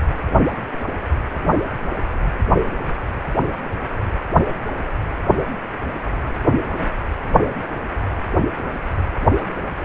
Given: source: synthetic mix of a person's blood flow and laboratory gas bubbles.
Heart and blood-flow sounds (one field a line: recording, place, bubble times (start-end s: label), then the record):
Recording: Doppler ultrasound of blood flow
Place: precordium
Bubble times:
no bubbles
From the record:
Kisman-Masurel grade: 000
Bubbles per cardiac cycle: 0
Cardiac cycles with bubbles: 0%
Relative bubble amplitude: no bubbles discernible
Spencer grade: 0 (complete lack of bubble signals)